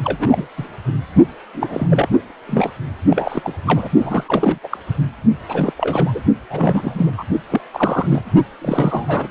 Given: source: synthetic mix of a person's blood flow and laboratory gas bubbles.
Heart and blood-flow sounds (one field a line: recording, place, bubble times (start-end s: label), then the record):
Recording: Doppler ultrasound of blood flow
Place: precordium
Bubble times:
0.00-0.45 s: bubbles
0.57-0.67 s: bubbles
1.54-1.87 s: bubbles
1.90-2.08 s: bubbles
2.48-2.71 s: bubbles
3.08-3.53 s: bubbles
3.67-3.89 s: bubbles
4.00-4.24 s: bubbles
4.28-4.59 s: bubbles
4.63-4.78 s: bubbles
5.48-5.73 s: bubbles
5.77-6.20 s: bubbles
6.50-7.12 s: bubbles
7.18-7.24 s: bubbles
7.49-7.61 s: bubbles
7.74-8.21 s: bubbles
8.61-9.28 s: bubbles
From the record:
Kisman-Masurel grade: 342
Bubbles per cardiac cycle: rolling drumbeat, 9 or more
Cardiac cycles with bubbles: 100%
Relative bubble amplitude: moderate (0.250 to 0.450)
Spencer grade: 3 (all of the cardiac periods contain showers or single bubble signals, but not dominating or overriding the cardiac motion signals)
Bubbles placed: only in the low amplitude regions of the cardiac cycle